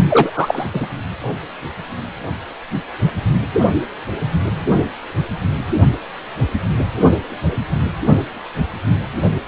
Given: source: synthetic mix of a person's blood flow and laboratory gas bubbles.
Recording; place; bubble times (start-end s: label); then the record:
Doppler ultrasound of blood flow; precordium
0.09-0.66 s: bubbles
0.73-0.86 s: bubbles
From the record:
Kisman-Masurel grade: 213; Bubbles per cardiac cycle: several, 3 to 8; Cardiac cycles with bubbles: 1 to 10%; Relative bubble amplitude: loud (0.450 to 0.775); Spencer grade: 1 (occasional bubble signal discernible with the cardiac motion signal, with majority of cardiac periods free of bubbles); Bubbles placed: only in the low amplitude regions of the cardiac cycle